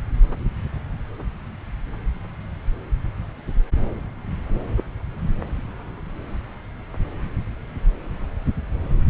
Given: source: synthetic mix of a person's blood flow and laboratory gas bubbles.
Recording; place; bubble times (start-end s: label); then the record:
Doppler ultrasound of blood flow; subclavian vein
no bubbles
From the record:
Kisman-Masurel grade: 000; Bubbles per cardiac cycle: 0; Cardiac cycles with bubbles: 0%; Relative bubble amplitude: no bubbles discernible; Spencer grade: 0 (complete lack of bubble signals)